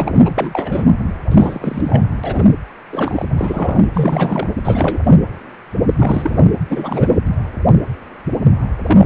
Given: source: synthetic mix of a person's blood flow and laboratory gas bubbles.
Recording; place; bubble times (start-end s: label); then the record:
Doppler ultrasound of blood flow; precordium
0.00-0.87 s: bubbles
1.31-2.04 s: bubbles
2.23-2.45 s: bubbles
2.91-3.25 s: bubbles
3.37-3.86 s: bubbles
3.94-4.50 s: bubbles
4.64-4.99 s: bubbles
5.04-5.16 s: bubbles
5.95-6.45 s: bubbles
6.69-7.19 s: bubbles
8.85-9.06 s: bubbles
From the record:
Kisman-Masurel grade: 333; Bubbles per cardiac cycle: rolling drumbeat, 9 or more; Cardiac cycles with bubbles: 50 to 99%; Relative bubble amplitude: loud (0.450 to 0.775); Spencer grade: 3 (all of the cardiac periods contain showers or single bubble signals, but not dominating or overriding the cardiac motion signals); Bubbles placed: anywhere in the cardiac cycle